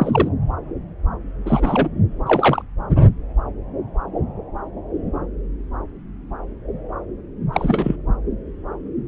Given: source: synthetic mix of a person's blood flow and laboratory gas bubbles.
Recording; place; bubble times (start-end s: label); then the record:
Doppler ultrasound of blood flow; subclavian vein
0.00-0.29 s: bubbles
1.46-1.88 s: bubbles
2.27-2.62 s: bubbles
7.53-7.96 s: bubbles
From the record:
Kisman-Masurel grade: 223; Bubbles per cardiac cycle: several, 3 to 8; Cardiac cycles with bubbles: 10 to 50%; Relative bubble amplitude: loud (0.450 to 0.775); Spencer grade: 2 (many but less than half of the cardiac periods contain bubble signals, singularly or in groups); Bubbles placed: anywhere in the cardiac cycle